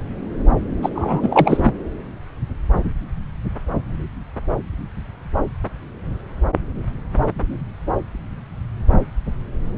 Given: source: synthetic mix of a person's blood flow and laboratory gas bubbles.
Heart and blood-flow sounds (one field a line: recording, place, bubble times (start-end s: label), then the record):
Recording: Doppler ultrasound of blood flow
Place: subclavian vein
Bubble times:
0.82-0.90 s: bubbles
0.94-1.72 s: bubbles
From the record:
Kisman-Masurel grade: 223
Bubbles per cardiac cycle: several, 3 to 8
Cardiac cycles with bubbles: 10 to 50%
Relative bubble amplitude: loud (0.450 to 0.775)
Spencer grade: 2 (many but less than half of the cardiac periods contain bubble signals, singularly or in groups)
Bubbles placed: anywhere in the cardiac cycle